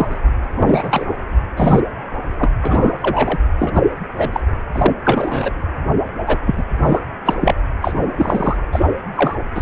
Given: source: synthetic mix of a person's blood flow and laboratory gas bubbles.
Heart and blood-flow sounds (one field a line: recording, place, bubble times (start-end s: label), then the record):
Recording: Doppler ultrasound of blood flow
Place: precordium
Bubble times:
0.00-0.20 s: bubbles
0.55-1.07 s: bubbles
1.56-1.81 s: bubbles
2.39-2.50 s: bubbles
2.61-2.96 s: bubbles
3.01-3.40 s: bubbles
3.59-3.71 s: bubbles
3.74-3.82 s: bubbles
4.17-4.29 s: bubbles
4.32-4.41 s: bubbles
4.72-4.92 s: bubbles
5.04-5.51 s: bubbles
6.26-6.38 s: bubbles
6.46-6.64 s: bubbles
6.82-7.00 s: bubbles
7.25-7.36 s: bubbles
7.41-7.54 s: bubbles
7.82-7.94 s: bubbles
8.16-8.57 s: bubbles
8.72-8.86 s: bubbles
9.15-9.36 s: bubbles
9.55-9.62 s: bubbles
From the record:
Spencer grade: 3 (all of the cardiac periods contain showers or single bubble signals, but not dominating or overriding the cardiac motion signals)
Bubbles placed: anywhere in the cardiac cycle